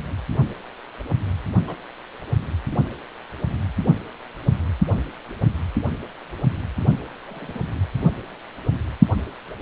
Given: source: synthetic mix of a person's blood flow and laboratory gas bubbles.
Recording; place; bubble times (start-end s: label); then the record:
Doppler ultrasound of blood flow; precordium
1.66-1.76 s: bubbles
4.93-5.01 s: bubbles
5.42-5.45 s: bubbles
7.27-7.59 s: bubbles
From the record:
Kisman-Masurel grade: 121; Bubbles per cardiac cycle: 1 to 2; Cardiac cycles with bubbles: 10 to 50%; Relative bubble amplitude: barely perceptible (0.100 to 0.250); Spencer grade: 2 (many but less than half of the cardiac periods contain bubble signals, singularly or in groups); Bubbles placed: only in the low amplitude regions of the cardiac cycle